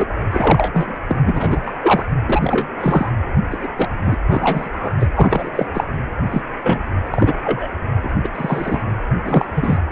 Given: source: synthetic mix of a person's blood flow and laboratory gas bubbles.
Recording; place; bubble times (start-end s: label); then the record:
Doppler ultrasound of blood flow; precordium
0.00-0.05 s: bubbles
0.31-0.92 s: bubbles
1.08-1.20 s: bubbles
1.25-1.61 s: bubbles
1.66-1.78 s: bubbles
1.81-2.06 s: bubbles
2.26-2.67 s: bubbles
2.81-3.10 s: bubbles
3.51-3.58 s: bubbles
3.63-3.68 s: bubbles
3.77-3.89 s: bubbles
4.04-4.17 s: bubbles
4.29-4.69 s: bubbles
4.72-4.95 s: bubbles
5.00-5.07 s: bubbles
5.16-5.50 s: bubbles
5.55-5.67 s: bubbles
5.74-5.84 s: bubbles
6.30-6.42 s: bubbles
6.63-6.79 s: bubbles
7.13-7.34 s: bubbles
7.42-7.68 s: bubbles
8.03-8.10 s: bubbles
8.13-8.29 s: bubbles
8.34-8.83 s: bubbles
9.24-9.46 s: bubbles
9.55-9.78 s: bubbles
From the record:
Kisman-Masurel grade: 243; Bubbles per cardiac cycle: several, 3 to 8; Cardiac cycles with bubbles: 100%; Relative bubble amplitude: loud (0.450 to 0.775); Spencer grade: 3 (all of the cardiac periods contain showers or single bubble signals, but not dominating or overriding the cardiac motion signals); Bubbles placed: anywhere in the cardiac cycle